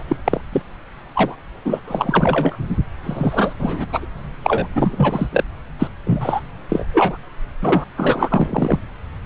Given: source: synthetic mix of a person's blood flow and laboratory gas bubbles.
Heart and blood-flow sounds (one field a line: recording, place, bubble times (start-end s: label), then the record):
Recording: Doppler ultrasound of blood flow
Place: subclavian vein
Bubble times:
0.00-0.04 s: bubbles
0.08-0.16 s: bubbles
0.24-0.41 s: bubbles
0.52-0.62 s: bubbles
1.15-1.35 s: bubbles
1.65-1.80 s: bubbles
1.87-2.57 s: bubbles
3.03-3.53 s: bubbles
3.59-3.86 s: bubbles
3.89-4.06 s: bubbles
4.43-4.68 s: bubbles
4.75-5.29 s: bubbles
5.32-5.44 s: bubbles
5.79-5.88 s: bubbles
6.06-6.40 s: bubbles
6.69-6.85 s: bubbles
6.93-7.17 s: bubbles
7.62-7.84 s: bubbles
7.97-8.79 s: bubbles
From the record:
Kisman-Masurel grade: 243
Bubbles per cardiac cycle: several, 3 to 8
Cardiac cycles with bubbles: 100%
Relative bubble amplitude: loud (0.450 to 0.775)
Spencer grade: 3 (all of the cardiac periods contain showers or single bubble signals, but not dominating or overriding the cardiac motion signals)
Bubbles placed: anywhere in the cardiac cycle